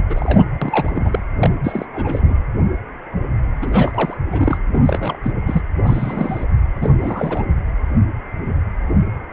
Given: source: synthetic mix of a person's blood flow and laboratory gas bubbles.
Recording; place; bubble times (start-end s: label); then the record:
Doppler ultrasound of blood flow; precordium
0.09-0.44 s: bubbles
0.61-1.20 s: bubbles
1.39-1.50 s: bubbles
1.64-1.86 s: bubbles
1.94-2.34 s: bubbles
3.61-4.17 s: bubbles
4.29-4.57 s: bubbles
4.71-5.19 s: bubbles
5.24-5.32 s: bubbles
5.46-5.63 s: bubbles
5.83-6.45 s: bubbles
6.76-6.90 s: bubbles
7.00-7.44 s: bubbles
From the record:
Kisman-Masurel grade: 332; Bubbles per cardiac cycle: rolling drumbeat, 9 or more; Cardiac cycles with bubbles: 50 to 99%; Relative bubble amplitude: moderate (0.250 to 0.450); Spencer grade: 3 (all of the cardiac periods contain showers or single bubble signals, but not dominating or overriding the cardiac motion signals); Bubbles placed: anywhere in the cardiac cycle